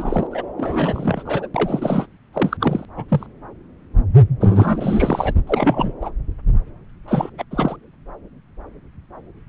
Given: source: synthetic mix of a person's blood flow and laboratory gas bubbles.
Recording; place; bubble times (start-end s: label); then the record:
Doppler ultrasound of blood flow; subclavian vein
0.00-0.27 s: bubbles
0.31-0.43 s: bubbles
0.57-1.23 s: bubbles
1.25-1.48 s: bubbles
1.54-2.06 s: bubbles
2.33-2.57 s: bubbles
2.60-2.85 s: bubbles
2.96-3.04 s: bubbles
3.08-3.26 s: bubbles
4.40-5.34 s: bubbles
5.47-5.94 s: bubbles
6.01-6.10 s: bubbles
7.08-7.29 s: bubbles
7.38-7.43 s: bubbles
7.51-7.76 s: bubbles
From the record:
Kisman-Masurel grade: 332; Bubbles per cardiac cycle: rolling drumbeat, 9 or more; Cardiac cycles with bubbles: 50 to 99%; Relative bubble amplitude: moderate (0.250 to 0.450); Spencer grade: 3 (all of the cardiac periods contain showers or single bubble signals, but not dominating or overriding the cardiac motion signals); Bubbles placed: anywhere in the cardiac cycle